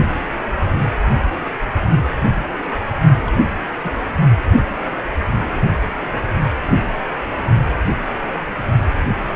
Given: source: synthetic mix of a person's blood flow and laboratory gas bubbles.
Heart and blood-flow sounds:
Doppler ultrasound of blood flow; precordium
3.27-3.30 s: bubbles
3.85-3.92 s: bubbles
From the record:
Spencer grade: 1 (occasional bubble signal discernible with the cardiac motion signal, with majority of cardiac periods free of bubbles); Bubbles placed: only in the low amplitude regions of the cardiac cycle

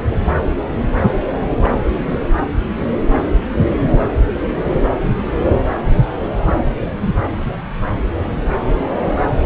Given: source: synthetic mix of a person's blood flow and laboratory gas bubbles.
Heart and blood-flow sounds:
Doppler ultrasound of blood flow; subclavian vein
1.60-1.70 s: bubbles
1.90-2.02 s: bubbles
2.06-2.19 s: bubbles
From the record:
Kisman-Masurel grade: 211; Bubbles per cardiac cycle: several, 3 to 8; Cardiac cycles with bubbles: 1 to 10%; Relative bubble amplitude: barely perceptible (0.100 to 0.250); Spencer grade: 1 (occasional bubble signal discernible with the cardiac motion signal, with majority of cardiac periods free of bubbles); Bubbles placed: anywhere in the cardiac cycle

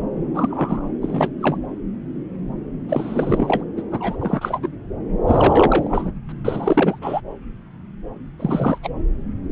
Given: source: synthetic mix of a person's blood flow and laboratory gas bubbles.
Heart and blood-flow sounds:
Doppler ultrasound of blood flow; subclavian vein
0.34-0.88 s: bubbles
1.02-1.29 s: bubbles
1.41-1.57 s: bubbles
2.89-3.65 s: bubbles
3.77-3.82 s: bubbles
3.92-4.17 s: bubbles
4.20-4.60 s: bubbles
4.62-4.68 s: bubbles
5.27-6.12 s: bubbles
6.28-6.32 s: bubbles
6.44-6.99 s: bubbles
7.01-7.20 s: bubbles
8.39-8.78 s: bubbles
8.83-8.90 s: bubbles
From the record:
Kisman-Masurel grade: 332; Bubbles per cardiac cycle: rolling drumbeat, 9 or more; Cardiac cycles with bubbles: 50 to 99%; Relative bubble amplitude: moderate (0.250 to 0.450); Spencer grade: 3 (all of the cardiac periods contain showers or single bubble signals, but not dominating or overriding the cardiac motion signals); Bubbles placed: anywhere in the cardiac cycle

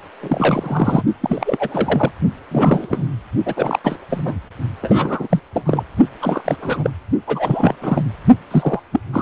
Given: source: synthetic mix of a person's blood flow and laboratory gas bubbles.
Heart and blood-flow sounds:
Doppler ultrasound of blood flow; precordium
0.21-1.03 s: bubbles
1.22-2.12 s: bubbles
2.51-3.08 s: bubbles
3.46-3.79 s: bubbles
3.84-3.99 s: bubbles
4.09-4.22 s: bubbles
4.25-4.35 s: bubbles
4.81-5.39 s: bubbles
5.54-5.83 s: bubbles
6.21-6.42 s: bubbles
6.44-6.57 s: bubbles
6.62-6.90 s: bubbles
7.26-7.74 s: bubbles
7.81-8.04 s: bubbles
8.50-8.82 s: bubbles
8.91-9.00 s: bubbles
9.12-9.22 s: bubbles
From the record:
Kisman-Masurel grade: 342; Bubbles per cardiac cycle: rolling drumbeat, 9 or more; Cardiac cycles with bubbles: 100%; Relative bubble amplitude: moderate (0.250 to 0.450); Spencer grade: 3 (all of the cardiac periods contain showers or single bubble signals, but not dominating or overriding the cardiac motion signals); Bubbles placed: only in the low amplitude regions of the cardiac cycle

